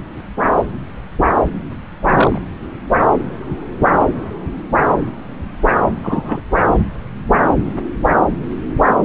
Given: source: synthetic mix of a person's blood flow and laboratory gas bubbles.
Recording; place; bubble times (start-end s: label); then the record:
Doppler ultrasound of blood flow; subclavian vein
2.06-2.41 s: bubbles
6.04-6.41 s: bubbles
From the record:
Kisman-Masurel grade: 123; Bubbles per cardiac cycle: 1 to 2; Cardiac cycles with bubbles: 10 to 50%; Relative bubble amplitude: loud (0.450 to 0.775); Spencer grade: 2 (many but less than half of the cardiac periods contain bubble signals, singularly or in groups); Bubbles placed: anywhere in the cardiac cycle